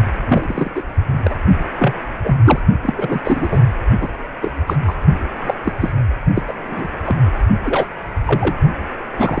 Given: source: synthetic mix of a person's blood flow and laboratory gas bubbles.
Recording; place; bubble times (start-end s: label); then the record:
Doppler ultrasound of blood flow; precordium
0.26-0.71 s: bubbles
0.75-0.83 s: bubbles
1.24-1.36 s: bubbles
1.78-1.94 s: bubbles
2.23-2.38 s: bubbles
2.45-2.62 s: bubbles
2.83-2.94 s: bubbles
2.96-3.21 s: bubbles
3.24-3.48 s: bubbles
3.51-3.60 s: bubbles
4.01-4.09 s: bubbles
4.41-4.51 s: bubbles
4.67-4.77 s: bubbles
4.88-4.95 s: bubbles
5.41-5.54 s: bubbles
5.64-5.72 s: bubbles
5.80-5.92 s: bubbles
6.35-6.43 s: bubbles
6.47-6.53 s: bubbles
6.71-6.88 s: bubbles
7.06-7.16 s: bubbles
7.64-7.87 s: bubbles
8.26-8.55 s: bubbles
9.17-9.40 s: bubbles
From the record:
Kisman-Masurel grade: 243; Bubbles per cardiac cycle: several, 3 to 8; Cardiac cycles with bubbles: 100%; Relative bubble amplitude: loud (0.450 to 0.775); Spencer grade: 3 (all of the cardiac periods contain showers or single bubble signals, but not dominating or overriding the cardiac motion signals); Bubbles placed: only in the low amplitude regions of the cardiac cycle